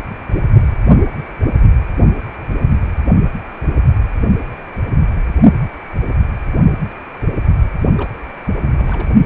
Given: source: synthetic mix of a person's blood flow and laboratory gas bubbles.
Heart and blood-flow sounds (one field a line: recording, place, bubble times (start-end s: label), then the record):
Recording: Doppler ultrasound of blood flow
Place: precordium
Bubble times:
7.98-8.13 s: bubbles
8.59-9.08 s: bubbles
From the record:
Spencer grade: 2 (many but less than half of the cardiac periods contain bubble signals, singularly or in groups)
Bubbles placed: only in the low amplitude regions of the cardiac cycle